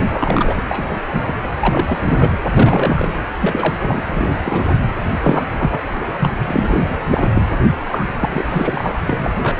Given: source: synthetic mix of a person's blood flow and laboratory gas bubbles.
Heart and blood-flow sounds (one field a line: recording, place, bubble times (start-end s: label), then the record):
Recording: Doppler ultrasound of blood flow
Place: precordium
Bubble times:
0.10-0.61 s: bubbles
0.68-0.97 s: bubbles
1.11-1.38 s: bubbles
1.43-1.48 s: bubbles
1.59-2.30 s: bubbles
2.57-3.08 s: bubbles
3.42-3.74 s: bubbles
3.80-4.02 s: bubbles
4.08-4.76 s: bubbles
5.23-5.49 s: bubbles
5.58-5.79 s: bubbles
5.97-6.33 s: bubbles
6.48-7.04 s: bubbles
7.10-7.30 s: bubbles
7.33-7.42 s: bubbles
7.90-8.06 s: bubbles
8.20-8.95 s: bubbles
9.06-9.30 s: bubbles
9.42-9.60 s: bubbles
From the record:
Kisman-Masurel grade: 342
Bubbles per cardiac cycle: rolling drumbeat, 9 or more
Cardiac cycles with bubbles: 100%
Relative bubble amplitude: moderate (0.250 to 0.450)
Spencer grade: 3 (all of the cardiac periods contain showers or single bubble signals, but not dominating or overriding the cardiac motion signals)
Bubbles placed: anywhere in the cardiac cycle